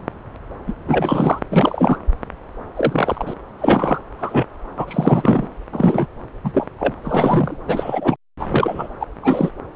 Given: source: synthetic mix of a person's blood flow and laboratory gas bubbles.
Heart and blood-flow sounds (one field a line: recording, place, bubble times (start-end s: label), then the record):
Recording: Doppler ultrasound of blood flow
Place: subclavian vein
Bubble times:
0.67-0.74 s: bubbles
0.88-1.39 s: bubbles
1.51-1.99 s: bubbles
2.75-3.33 s: bubbles
3.58-3.98 s: bubbles
4.18-4.46 s: bubbles
4.78-5.48 s: bubbles
5.72-6.07 s: bubbles
6.44-6.67 s: bubbles
6.79-6.94 s: bubbles
7.04-7.58 s: bubbles
7.67-8.16 s: bubbles
8.39-8.88 s: bubbles
9.00-9.06 s: bubbles
9.22-9.52 s: bubbles
From the record:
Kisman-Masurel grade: 233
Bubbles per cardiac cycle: several, 3 to 8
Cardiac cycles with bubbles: 50 to 99%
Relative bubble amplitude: loud (0.450 to 0.775)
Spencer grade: 3 (all of the cardiac periods contain showers or single bubble signals, but not dominating or overriding the cardiac motion signals)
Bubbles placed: anywhere in the cardiac cycle